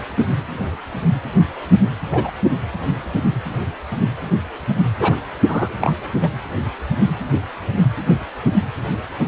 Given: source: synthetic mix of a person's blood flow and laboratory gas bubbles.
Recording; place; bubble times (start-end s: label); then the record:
Doppler ultrasound of blood flow; precordium
2.12-2.31 s: bubbles
5.00-5.16 s: bubbles
5.48-5.74 s: bubbles
5.81-5.95 s: bubbles
6.23-6.29 s: bubbles
From the record:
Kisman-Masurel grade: 123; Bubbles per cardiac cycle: 1 to 2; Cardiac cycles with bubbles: 10 to 50%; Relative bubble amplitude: loud (0.450 to 0.775); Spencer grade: 2 (many but less than half of the cardiac periods contain bubble signals, singularly or in groups); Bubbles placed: anywhere in the cardiac cycle